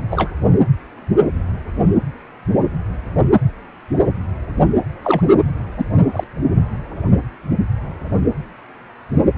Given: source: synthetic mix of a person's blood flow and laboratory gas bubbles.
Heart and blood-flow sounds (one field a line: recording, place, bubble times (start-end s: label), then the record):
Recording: Doppler ultrasound of blood flow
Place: precordium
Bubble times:
0.10-0.31 s: bubbles
5.03-5.22 s: bubbles
5.78-5.85 s: bubbles
6.12-6.24 s: bubbles
From the record:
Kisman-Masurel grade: 122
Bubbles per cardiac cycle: 1 to 2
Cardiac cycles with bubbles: 10 to 50%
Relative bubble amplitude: moderate (0.250 to 0.450)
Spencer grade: 2 (many but less than half of the cardiac periods contain bubble signals, singularly or in groups)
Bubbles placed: anywhere in the cardiac cycle